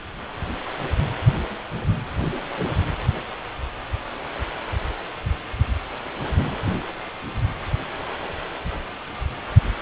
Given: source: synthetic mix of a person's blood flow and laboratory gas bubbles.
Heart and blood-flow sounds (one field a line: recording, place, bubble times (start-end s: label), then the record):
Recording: Doppler ultrasound of blood flow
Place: precordium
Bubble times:
no bubbles
From the record:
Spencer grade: 0 (complete lack of bubble signals)